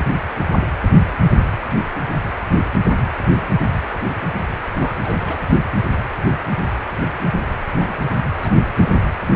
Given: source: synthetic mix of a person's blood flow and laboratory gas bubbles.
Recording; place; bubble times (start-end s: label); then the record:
Doppler ultrasound of blood flow; precordium
4.76-4.96 s: bubbles
5.02-5.38 s: bubbles
7.74-7.96 s: bubbles
8.42-8.53 s: bubbles
8.74-9.09 s: bubbles
From the record:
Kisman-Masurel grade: 121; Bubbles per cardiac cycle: 1 to 2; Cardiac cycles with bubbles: 10 to 50%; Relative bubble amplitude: barely perceptible (0.100 to 0.250); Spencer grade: 2 (many but less than half of the cardiac periods contain bubble signals, singularly or in groups); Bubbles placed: anywhere in the cardiac cycle